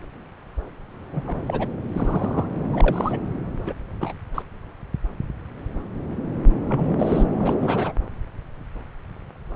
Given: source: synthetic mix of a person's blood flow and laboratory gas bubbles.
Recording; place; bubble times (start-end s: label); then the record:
Doppler ultrasound of blood flow; subclavian vein
1.13-1.22 s: bubbles
1.27-1.68 s: bubbles
1.92-2.46 s: bubbles
2.72-3.19 s: bubbles
3.66-3.73 s: bubbles
4.00-4.12 s: bubbles
4.34-4.42 s: bubbles
6.70-7.26 s: bubbles
7.40-7.58 s: bubbles
7.62-7.92 s: bubbles
From the record:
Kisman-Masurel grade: 222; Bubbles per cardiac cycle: several, 3 to 8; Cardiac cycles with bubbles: 10 to 50%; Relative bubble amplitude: moderate (0.250 to 0.450); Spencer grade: 2 (many but less than half of the cardiac periods contain bubble signals, singularly or in groups); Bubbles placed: anywhere in the cardiac cycle